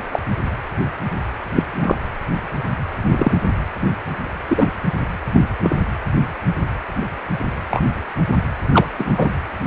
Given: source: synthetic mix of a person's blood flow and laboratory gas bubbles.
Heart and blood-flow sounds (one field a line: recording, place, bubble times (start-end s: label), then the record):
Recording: Doppler ultrasound of blood flow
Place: precordium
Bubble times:
0.12-0.19 s: bubbles
1.55-1.64 s: bubbles
1.80-1.95 s: bubbles
3.10-3.37 s: bubbles
4.48-4.68 s: bubbles
5.27-5.40 s: bubbles
5.63-5.77 s: bubbles
7.70-7.82 s: bubbles
8.74-8.88 s: bubbles
8.98-9.32 s: bubbles
From the record:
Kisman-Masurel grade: 123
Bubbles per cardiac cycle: 1 to 2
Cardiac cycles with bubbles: 10 to 50%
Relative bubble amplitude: loud (0.450 to 0.775)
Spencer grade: 2 (many but less than half of the cardiac periods contain bubble signals, singularly or in groups)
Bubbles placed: anywhere in the cardiac cycle